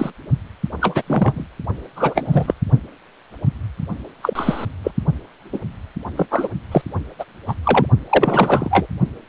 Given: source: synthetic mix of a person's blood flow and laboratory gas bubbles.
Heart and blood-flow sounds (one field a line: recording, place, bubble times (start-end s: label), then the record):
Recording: Doppler ultrasound of blood flow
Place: precordium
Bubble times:
0.00-0.10 s: bubbles
0.80-1.02 s: bubbles
1.06-1.46 s: bubbles
1.95-2.54 s: bubbles
4.22-4.65 s: bubbles
4.83-4.91 s: bubbles
5.52-5.59 s: bubbles
6.15-6.26 s: bubbles
6.30-6.48 s: bubbles
6.71-6.81 s: bubbles
7.18-7.24 s: bubbles
7.47-7.54 s: bubbles
7.63-7.86 s: bubbles
8.10-8.86 s: bubbles
From the record:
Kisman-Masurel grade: 233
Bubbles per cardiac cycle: several, 3 to 8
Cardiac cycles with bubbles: 50 to 99%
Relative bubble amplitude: loud (0.450 to 0.775)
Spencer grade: 3 (all of the cardiac periods contain showers or single bubble signals, but not dominating or overriding the cardiac motion signals)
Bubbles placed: only in the low amplitude regions of the cardiac cycle